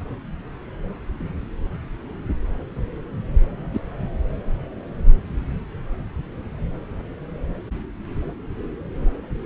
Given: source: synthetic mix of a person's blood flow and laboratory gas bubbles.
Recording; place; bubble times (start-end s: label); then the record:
Doppler ultrasound of blood flow; subclavian vein
3.73-3.80 s: bubbles
From the record:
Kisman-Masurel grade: 112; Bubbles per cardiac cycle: 1 to 2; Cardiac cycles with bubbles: 1 to 10%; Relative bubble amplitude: moderate (0.250 to 0.450); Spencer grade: 1 (occasional bubble signal discernible with the cardiac motion signal, with majority of cardiac periods free of bubbles); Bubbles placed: anywhere in the cardiac cycle